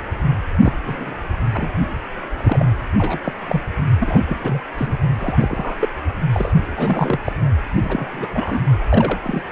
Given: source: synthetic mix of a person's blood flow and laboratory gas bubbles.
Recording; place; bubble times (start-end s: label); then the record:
Doppler ultrasound of blood flow; precordium
0.64-0.73 s: bubbles
0.83-1.14 s: bubbles
1.53-1.69 s: bubbles
2.38-2.66 s: bubbles
2.98-3.19 s: bubbles
3.24-3.33 s: bubbles
3.46-3.62 s: bubbles
3.99-4.21 s: bubbles
4.26-4.38 s: bubbles
4.42-4.60 s: bubbles
4.77-4.97 s: bubbles
5.18-5.76 s: bubbles
5.79-5.88 s: bubbles
6.33-6.53 s: bubbles
6.75-7.18 s: bubbles
7.24-7.32 s: bubbles
7.81-8.61 s: bubbles
8.89-9.19 s: bubbles
9.23-9.43 s: bubbles
From the record:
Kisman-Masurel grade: 242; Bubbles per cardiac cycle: several, 3 to 8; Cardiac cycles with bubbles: 100%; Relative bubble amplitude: moderate (0.250 to 0.450); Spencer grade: 3 (all of the cardiac periods contain showers or single bubble signals, but not dominating or overriding the cardiac motion signals); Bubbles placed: anywhere in the cardiac cycle